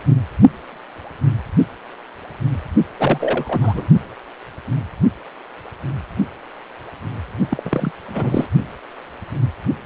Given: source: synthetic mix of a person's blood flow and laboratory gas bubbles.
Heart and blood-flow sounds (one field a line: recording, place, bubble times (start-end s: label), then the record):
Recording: Doppler ultrasound of blood flow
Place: precordium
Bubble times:
2.99-3.88 s: bubbles
7.49-7.91 s: bubbles
8.08-8.47 s: bubbles
From the record:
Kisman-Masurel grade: 222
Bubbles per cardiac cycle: several, 3 to 8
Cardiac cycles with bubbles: 10 to 50%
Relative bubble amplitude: moderate (0.250 to 0.450)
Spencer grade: 2 (many but less than half of the cardiac periods contain bubble signals, singularly or in groups)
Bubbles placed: only in the low amplitude regions of the cardiac cycle